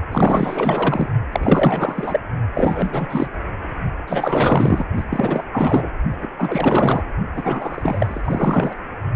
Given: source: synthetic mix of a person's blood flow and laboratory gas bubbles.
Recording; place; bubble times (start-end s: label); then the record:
Doppler ultrasound of blood flow; precordium
0.11-1.08 s: bubbles
1.32-2.21 s: bubbles
2.54-3.27 s: bubbles
4.07-4.85 s: bubbles
4.96-5.04 s: bubbles
5.10-5.42 s: bubbles
5.52-5.90 s: bubbles
6.22-6.28 s: bubbles
6.38-7.04 s: bubbles
7.35-8.21 s: bubbles
8.25-8.81 s: bubbles
From the record:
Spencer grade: 4 (maximum detectable bubble signal sounding continuously throughout systole and diastole of every cardiac period, and overriding the amplitude of the normal cardiac signals); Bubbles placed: only in the low amplitude regions of the cardiac cycle